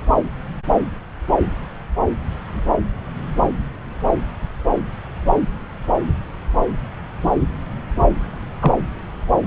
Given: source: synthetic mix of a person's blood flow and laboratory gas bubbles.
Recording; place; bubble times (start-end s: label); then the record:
Doppler ultrasound of blood flow; subclavian vein
8.61-8.72 s: bubbles
From the record:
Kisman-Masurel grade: 113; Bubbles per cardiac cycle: 1 to 2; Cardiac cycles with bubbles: 1 to 10%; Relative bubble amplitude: loud (0.450 to 0.775); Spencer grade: 1 (occasional bubble signal discernible with the cardiac motion signal, with majority of cardiac periods free of bubbles); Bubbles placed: anywhere in the cardiac cycle